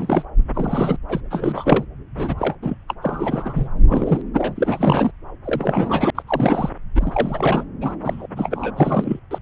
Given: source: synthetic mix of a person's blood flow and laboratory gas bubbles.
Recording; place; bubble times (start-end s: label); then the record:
Doppler ultrasound of blood flow; subclavian vein
0.00-0.24 s: bubbles
0.55-0.97 s: bubbles
1.08-1.21 s: bubbles
1.30-1.85 s: bubbles
2.16-2.35 s: bubbles
2.38-2.55 s: bubbles
2.62-2.76 s: bubbles
2.88-2.94 s: bubbles
3.01-3.69 s: bubbles
3.87-4.21 s: bubbles
4.33-5.12 s: bubbles
5.44-6.10 s: bubbles
6.15-6.22 s: bubbles
6.27-6.69 s: bubbles
6.95-7.64 s: bubbles
7.80-7.96 s: bubbles
8.02-8.27 s: bubbles
8.37-8.71 s: bubbles
8.76-9.20 s: bubbles
9.30-9.38 s: bubbles
From the record:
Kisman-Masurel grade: 342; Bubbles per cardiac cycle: rolling drumbeat, 9 or more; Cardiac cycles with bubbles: 100%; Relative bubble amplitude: moderate (0.250 to 0.450); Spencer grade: 3 (all of the cardiac periods contain showers or single bubble signals, but not dominating or overriding the cardiac motion signals); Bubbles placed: anywhere in the cardiac cycle